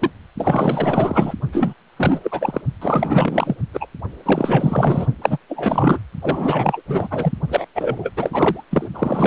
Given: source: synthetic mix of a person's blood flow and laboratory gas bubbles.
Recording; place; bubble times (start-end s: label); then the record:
Doppler ultrasound of blood flow; precordium
0.01-0.10 s: bubbles
0.37-1.34 s: bubbles
1.52-1.74 s: bubbles
1.97-2.62 s: bubbles
2.81-3.56 s: bubbles
3.73-3.86 s: bubbles
4.23-5.07 s: bubbles
5.21-5.38 s: bubbles
5.49-6.00 s: bubbles
6.21-6.81 s: bubbles
6.87-7.08 s: bubbles
7.10-7.32 s: bubbles
7.48-7.65 s: bubbles
7.75-8.09 s: bubbles
8.16-8.64 s: bubbles
8.71-8.88 s: bubbles
8.94-9.27 s: bubbles
From the record:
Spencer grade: 4 (maximum detectable bubble signal sounding continuously throughout systole and diastole of every cardiac period, and overriding the amplitude of the normal cardiac signals); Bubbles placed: only in the low amplitude regions of the cardiac cycle